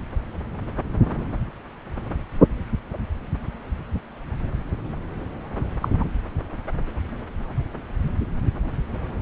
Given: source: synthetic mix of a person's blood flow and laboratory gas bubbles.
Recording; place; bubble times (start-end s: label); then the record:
Doppler ultrasound of blood flow; subclavian vein
5.80-5.88 s: bubbles
5.98-6.05 s: bubbles
From the record:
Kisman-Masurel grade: 112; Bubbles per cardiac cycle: 1 to 2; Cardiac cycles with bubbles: 1 to 10%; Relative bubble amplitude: moderate (0.250 to 0.450); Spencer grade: 1 (occasional bubble signal discernible with the cardiac motion signal, with majority of cardiac periods free of bubbles); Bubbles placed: anywhere in the cardiac cycle